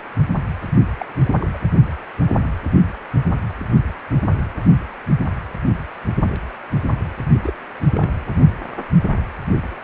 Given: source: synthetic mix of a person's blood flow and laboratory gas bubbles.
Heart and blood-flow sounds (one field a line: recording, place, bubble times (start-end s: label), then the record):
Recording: Doppler ultrasound of blood flow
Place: precordium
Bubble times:
0.99-1.06 s: bubbles
1.23-1.35 s: bubbles
1.40-1.46 s: bubbles
1.53-1.58 s: bubbles
7.38-7.54 s: bubbles
7.92-8.20 s: bubbles
From the record:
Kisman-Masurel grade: 221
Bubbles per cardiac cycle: several, 3 to 8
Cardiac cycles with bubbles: 10 to 50%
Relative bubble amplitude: barely perceptible (0.100 to 0.250)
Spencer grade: 2 (many but less than half of the cardiac periods contain bubble signals, singularly or in groups)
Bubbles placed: only in the low amplitude regions of the cardiac cycle